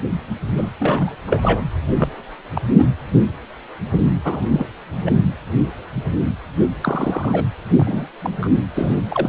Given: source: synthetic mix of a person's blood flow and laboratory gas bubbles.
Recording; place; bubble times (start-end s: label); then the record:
Doppler ultrasound of blood flow; precordium
0.57-0.68 s: bubbles
0.79-1.15 s: bubbles
1.27-1.63 s: bubbles
1.96-2.10 s: bubbles
2.54-2.62 s: bubbles
2.77-2.85 s: bubbles
4.24-4.41 s: bubbles
4.52-4.67 s: bubbles
5.05-5.11 s: bubbles
6.82-7.45 s: bubbles
7.76-8.07 s: bubbles
8.22-8.48 s: bubbles
8.75-9.00 s: bubbles
9.08-9.29 s: bubbles
From the record:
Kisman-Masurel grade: 232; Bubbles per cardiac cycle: several, 3 to 8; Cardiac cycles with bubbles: 50 to 99%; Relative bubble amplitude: moderate (0.250 to 0.450); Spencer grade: 3 (all of the cardiac periods contain showers or single bubble signals, but not dominating or overriding the cardiac motion signals); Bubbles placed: anywhere in the cardiac cycle